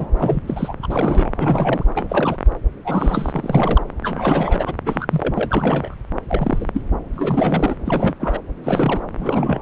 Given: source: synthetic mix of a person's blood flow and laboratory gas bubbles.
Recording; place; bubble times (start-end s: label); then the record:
Doppler ultrasound of blood flow; subclavian vein
0.00-0.07 s: bubbles
0.18-0.40 s: bubbles
0.47-0.74 s: bubbles
0.82-1.32 s: bubbles
1.37-1.86 s: bubbles
1.95-2.37 s: bubbles
2.84-3.32 s: bubbles
3.35-3.83 s: bubbles
4.02-4.75 s: bubbles
4.85-5.06 s: bubbles
5.09-5.94 s: bubbles
6.28-6.71 s: bubbles
6.73-6.81 s: bubbles
7.13-7.75 s: bubbles
7.85-8.15 s: bubbles
8.20-8.39 s: bubbles
8.64-9.00 s: bubbles
9.18-9.60 s: bubbles
From the record:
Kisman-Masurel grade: 342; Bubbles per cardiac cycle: rolling drumbeat, 9 or more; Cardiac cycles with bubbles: 100%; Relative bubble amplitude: moderate (0.250 to 0.450); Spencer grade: 3 (all of the cardiac periods contain showers or single bubble signals, but not dominating or overriding the cardiac motion signals); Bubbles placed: anywhere in the cardiac cycle